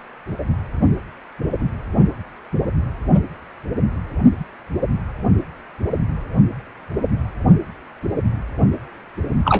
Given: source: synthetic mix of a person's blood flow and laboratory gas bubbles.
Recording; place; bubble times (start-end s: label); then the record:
Doppler ultrasound of blood flow; precordium
9.45-9.59 s: bubbles
From the record:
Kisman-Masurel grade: 123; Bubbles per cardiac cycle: 1 to 2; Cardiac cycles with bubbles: 10 to 50%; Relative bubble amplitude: loud (0.450 to 0.775); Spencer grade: 2 (many but less than half of the cardiac periods contain bubble signals, singularly or in groups); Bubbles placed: anywhere in the cardiac cycle